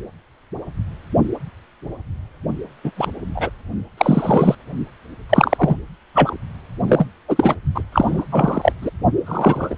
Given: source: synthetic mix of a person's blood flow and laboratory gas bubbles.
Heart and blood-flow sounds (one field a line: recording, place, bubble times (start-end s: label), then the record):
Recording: Doppler ultrasound of blood flow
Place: precordium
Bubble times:
2.83-2.92 s: bubbles
2.96-3.10 s: bubbles
3.35-3.50 s: bubbles
3.98-4.55 s: bubbles
5.29-5.77 s: bubbles
6.15-6.37 s: bubbles
6.87-7.07 s: bubbles
7.28-7.55 s: bubbles
7.75-7.83 s: bubbles
7.92-8.25 s: bubbles
8.31-8.72 s: bubbles
8.82-8.90 s: bubbles
9.26-9.75 s: bubbles
From the record:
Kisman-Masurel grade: 233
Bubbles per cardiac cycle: several, 3 to 8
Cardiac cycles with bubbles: 50 to 99%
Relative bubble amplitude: loud (0.450 to 0.775)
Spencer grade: 3 (all of the cardiac periods contain showers or single bubble signals, but not dominating or overriding the cardiac motion signals)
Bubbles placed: only in the low amplitude regions of the cardiac cycle